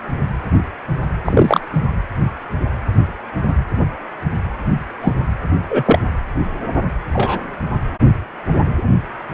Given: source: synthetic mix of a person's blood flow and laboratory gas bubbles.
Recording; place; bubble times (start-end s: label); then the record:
Doppler ultrasound of blood flow; precordium
1.25-1.61 s: bubbles
5.01-5.13 s: bubbles
5.70-5.83 s: bubbles
5.85-6.00 s: bubbles
7.13-7.43 s: bubbles
From the record:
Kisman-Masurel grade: 123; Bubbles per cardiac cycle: 1 to 2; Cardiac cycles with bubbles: 10 to 50%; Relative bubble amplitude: loud (0.450 to 0.775); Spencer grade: 2 (many but less than half of the cardiac periods contain bubble signals, singularly or in groups); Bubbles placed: anywhere in the cardiac cycle